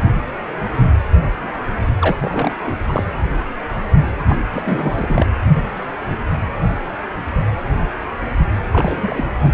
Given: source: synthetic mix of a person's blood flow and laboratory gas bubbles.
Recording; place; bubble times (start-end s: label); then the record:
Doppler ultrasound of blood flow; precordium
2.00-2.17 s: bubbles
2.20-2.55 s: bubbles
2.62-2.79 s: bubbles
2.86-3.04 s: bubbles
4.29-4.38 s: bubbles
4.52-4.63 s: bubbles
4.66-5.26 s: bubbles
8.71-9.25 s: bubbles
9.43-9.54 s: bubbles
From the record:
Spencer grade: 3 (all of the cardiac periods contain showers or single bubble signals, but not dominating or overriding the cardiac motion signals); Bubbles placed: anywhere in the cardiac cycle